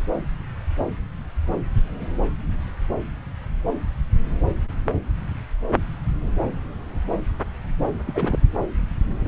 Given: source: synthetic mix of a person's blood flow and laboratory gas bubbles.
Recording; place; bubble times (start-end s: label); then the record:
Doppler ultrasound of blood flow; subclavian vein
8.06-8.39 s: bubbles
From the record:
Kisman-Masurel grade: 221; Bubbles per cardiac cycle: several, 3 to 8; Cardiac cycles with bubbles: 10 to 50%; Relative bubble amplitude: barely perceptible (0.100 to 0.250); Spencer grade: 2 (many but less than half of the cardiac periods contain bubble signals, singularly or in groups); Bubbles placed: anywhere in the cardiac cycle